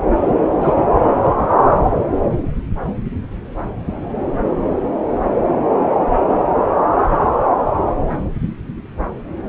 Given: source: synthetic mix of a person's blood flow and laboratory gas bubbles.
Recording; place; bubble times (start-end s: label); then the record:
Doppler ultrasound of blood flow; subclavian vein
0.61-0.86 s: bubbles
From the record:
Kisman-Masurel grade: 212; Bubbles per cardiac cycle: several, 3 to 8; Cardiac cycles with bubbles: 1 to 10%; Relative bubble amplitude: moderate (0.250 to 0.450); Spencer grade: 1 (occasional bubble signal discernible with the cardiac motion signal, with majority of cardiac periods free of bubbles); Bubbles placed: anywhere in the cardiac cycle